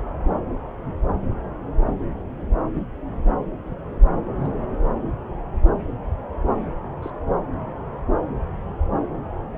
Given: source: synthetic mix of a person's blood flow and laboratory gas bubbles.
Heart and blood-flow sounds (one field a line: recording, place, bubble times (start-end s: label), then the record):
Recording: Doppler ultrasound of blood flow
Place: subclavian vein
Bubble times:
2.74-2.82 s: bubbles
4.41-4.52 s: bubbles
7.02-7.11 s: bubbles
7.54-7.84 s: bubbles
From the record:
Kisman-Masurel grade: 121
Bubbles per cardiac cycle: 1 to 2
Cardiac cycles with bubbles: 10 to 50%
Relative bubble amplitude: barely perceptible (0.100 to 0.250)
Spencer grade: 2 (many but less than half of the cardiac periods contain bubble signals, singularly or in groups)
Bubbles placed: anywhere in the cardiac cycle